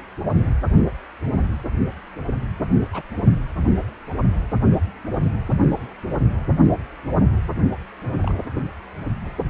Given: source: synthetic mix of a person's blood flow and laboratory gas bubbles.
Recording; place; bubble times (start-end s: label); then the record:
Doppler ultrasound of blood flow; precordium
2.92-3.02 s: bubbles
8.23-8.35 s: bubbles
From the record:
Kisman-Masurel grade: 121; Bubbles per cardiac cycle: 1 to 2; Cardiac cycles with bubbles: 10 to 50%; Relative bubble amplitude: barely perceptible (0.100 to 0.250); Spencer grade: 2 (many but less than half of the cardiac periods contain bubble signals, singularly or in groups); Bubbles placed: only in the low amplitude regions of the cardiac cycle